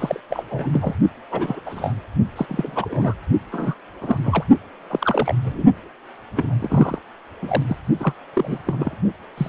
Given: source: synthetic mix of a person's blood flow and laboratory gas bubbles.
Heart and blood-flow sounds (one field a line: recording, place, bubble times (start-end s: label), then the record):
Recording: Doppler ultrasound of blood flow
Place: precordium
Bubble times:
0.00-0.20 s: bubbles
0.30-0.44 s: bubbles
0.51-0.69 s: bubbles
0.73-0.95 s: bubbles
1.31-1.60 s: bubbles
1.65-1.92 s: bubbles
2.35-2.46 s: bubbles
2.48-3.14 s: bubbles
3.51-3.75 s: bubbles
4.01-4.18 s: bubbles
4.24-4.45 s: bubbles
4.89-5.37 s: bubbles
5.44-5.64 s: bubbles
6.37-6.55 s: bubbles
6.59-6.99 s: bubbles
7.42-7.62 s: bubbles
7.67-7.76 s: bubbles
8.00-8.13 s: bubbles
8.34-8.60 s: bubbles
8.67-8.96 s: bubbles
9.37-9.49 s: bubbles
From the record:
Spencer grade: 3 (all of the cardiac periods contain showers or single bubble signals, but not dominating or overriding the cardiac motion signals)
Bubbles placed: only in the low amplitude regions of the cardiac cycle